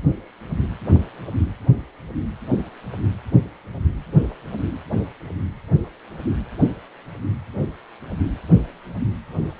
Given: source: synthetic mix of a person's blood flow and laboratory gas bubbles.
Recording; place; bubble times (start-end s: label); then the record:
Doppler ultrasound of blood flow; precordium
no bubbles
From the record:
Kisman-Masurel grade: 000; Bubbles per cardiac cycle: 0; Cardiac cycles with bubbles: 0%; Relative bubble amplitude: no bubbles discernible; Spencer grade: 0 (complete lack of bubble signals)